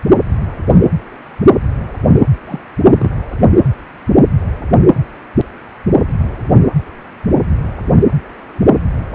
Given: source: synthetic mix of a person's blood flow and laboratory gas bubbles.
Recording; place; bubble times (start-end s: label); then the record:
Doppler ultrasound of blood flow; precordium
2.47-2.59 s: bubbles
2.86-3.10 s: bubbles
From the record:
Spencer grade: 1 (occasional bubble signal discernible with the cardiac motion signal, with majority of cardiac periods free of bubbles); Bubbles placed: anywhere in the cardiac cycle